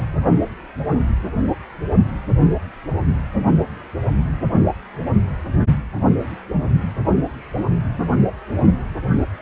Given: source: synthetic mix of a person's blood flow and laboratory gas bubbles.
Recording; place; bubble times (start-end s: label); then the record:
Doppler ultrasound of blood flow; precordium
0.00-0.04 s: bubbles
From the record:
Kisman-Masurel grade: 112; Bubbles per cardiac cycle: 1 to 2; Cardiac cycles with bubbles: 1 to 10%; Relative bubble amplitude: moderate (0.250 to 0.450); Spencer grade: 1 (occasional bubble signal discernible with the cardiac motion signal, with majority of cardiac periods free of bubbles); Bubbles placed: only in the low amplitude regions of the cardiac cycle